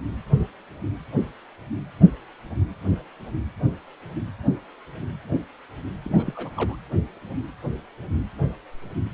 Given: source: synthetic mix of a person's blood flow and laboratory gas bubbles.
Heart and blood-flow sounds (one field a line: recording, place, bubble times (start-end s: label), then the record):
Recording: Doppler ultrasound of blood flow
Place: precordium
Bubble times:
6.04-6.76 s: bubbles
From the record:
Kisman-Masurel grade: 211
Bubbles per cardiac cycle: several, 3 to 8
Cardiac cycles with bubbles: 1 to 10%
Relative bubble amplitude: barely perceptible (0.100 to 0.250)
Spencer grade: 1 (occasional bubble signal discernible with the cardiac motion signal, with majority of cardiac periods free of bubbles)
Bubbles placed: anywhere in the cardiac cycle